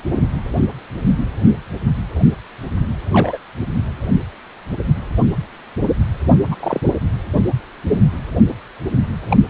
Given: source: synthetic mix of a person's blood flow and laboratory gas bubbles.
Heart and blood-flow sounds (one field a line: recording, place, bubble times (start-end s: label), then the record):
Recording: Doppler ultrasound of blood flow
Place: precordium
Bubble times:
2.99-3.39 s: bubbles
6.50-6.55 s: bubbles
6.60-6.79 s: bubbles
9.30-9.37 s: bubbles
From the record:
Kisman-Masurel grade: 122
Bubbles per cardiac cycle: 1 to 2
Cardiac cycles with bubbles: 10 to 50%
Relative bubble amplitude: moderate (0.250 to 0.450)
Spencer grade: 2 (many but less than half of the cardiac periods contain bubble signals, singularly or in groups)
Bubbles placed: anywhere in the cardiac cycle